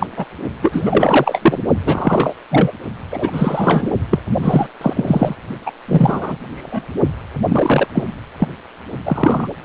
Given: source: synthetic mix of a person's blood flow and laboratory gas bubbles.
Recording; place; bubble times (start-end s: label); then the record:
Doppler ultrasound of blood flow; precordium
0.00-0.07 s: bubbles
0.16-0.26 s: bubbles
0.62-1.59 s: bubbles
1.85-2.35 s: bubbles
2.50-2.71 s: bubbles
3.11-3.30 s: bubbles
3.32-3.91 s: bubbles
4.10-4.19 s: bubbles
4.42-4.69 s: bubbles
4.81-5.35 s: bubbles
5.66-5.71 s: bubbles
5.88-6.37 s: bubbles
6.55-6.87 s: bubbles
7.48-7.88 s: bubbles
7.95-8.03 s: bubbles
8.39-8.47 s: bubbles
9.05-9.47 s: bubbles
From the record:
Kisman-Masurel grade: 243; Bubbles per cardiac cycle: several, 3 to 8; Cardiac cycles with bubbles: 100%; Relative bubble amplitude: loud (0.450 to 0.775); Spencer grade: 3 (all of the cardiac periods contain showers or single bubble signals, but not dominating or overriding the cardiac motion signals); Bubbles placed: only in the low amplitude regions of the cardiac cycle